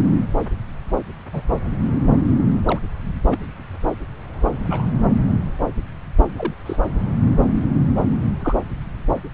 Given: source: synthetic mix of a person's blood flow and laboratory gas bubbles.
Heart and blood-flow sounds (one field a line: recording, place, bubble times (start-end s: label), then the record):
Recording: Doppler ultrasound of blood flow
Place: subclavian vein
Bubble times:
0.04-0.10 s: bubbles
1.33-1.42 s: bubbles
2.68-2.79 s: bubbles
3.31-3.39 s: bubbles
4.70-4.86 s: bubbles
6.37-6.54 s: bubbles
6.66-6.76 s: bubbles
8.39-8.55 s: bubbles
From the record:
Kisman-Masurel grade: 121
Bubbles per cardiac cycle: 1 to 2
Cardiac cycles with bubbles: 10 to 50%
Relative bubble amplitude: barely perceptible (0.100 to 0.250)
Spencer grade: 2 (many but less than half of the cardiac periods contain bubble signals, singularly or in groups)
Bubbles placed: anywhere in the cardiac cycle